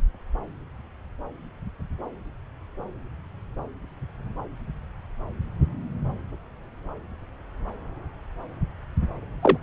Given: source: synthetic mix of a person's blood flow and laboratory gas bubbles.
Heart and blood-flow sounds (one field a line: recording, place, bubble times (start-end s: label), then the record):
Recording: Doppler ultrasound of blood flow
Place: subclavian vein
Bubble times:
9.43-9.58 s: bubbles
From the record:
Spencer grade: 1 (occasional bubble signal discernible with the cardiac motion signal, with majority of cardiac periods free of bubbles)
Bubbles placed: anywhere in the cardiac cycle